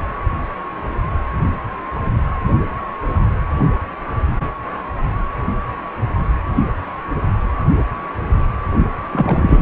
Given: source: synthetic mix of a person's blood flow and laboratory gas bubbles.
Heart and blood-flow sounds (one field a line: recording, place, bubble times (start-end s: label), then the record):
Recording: Doppler ultrasound of blood flow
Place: precordium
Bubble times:
9.12-9.62 s: bubbles
From the record:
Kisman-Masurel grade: 123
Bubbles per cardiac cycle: 1 to 2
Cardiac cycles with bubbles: 10 to 50%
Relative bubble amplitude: loud (0.450 to 0.775)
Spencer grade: 2 (many but less than half of the cardiac periods contain bubble signals, singularly or in groups)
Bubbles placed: anywhere in the cardiac cycle